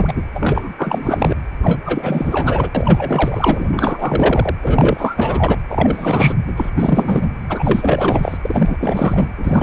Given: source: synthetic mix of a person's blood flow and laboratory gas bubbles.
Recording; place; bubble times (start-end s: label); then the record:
Doppler ultrasound of blood flow; precordium
0.00-0.23 s: bubbles
0.35-0.74 s: bubbles
0.77-1.35 s: bubbles
1.62-2.69 s: bubbles
2.75-4.56 s: bubbles
4.62-5.57 s: bubbles
5.69-6.35 s: bubbles
6.47-6.54 s: bubbles
6.57-6.70 s: bubbles
6.76-7.28 s: bubbles
7.49-8.38 s: bubbles
8.42-8.77 s: bubbles
8.80-9.32 s: bubbles
9.38-9.63 s: bubbles
From the record:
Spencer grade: 4 (maximum detectable bubble signal sounding continuously throughout systole and diastole of every cardiac period, and overriding the amplitude of the normal cardiac signals); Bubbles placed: anywhere in the cardiac cycle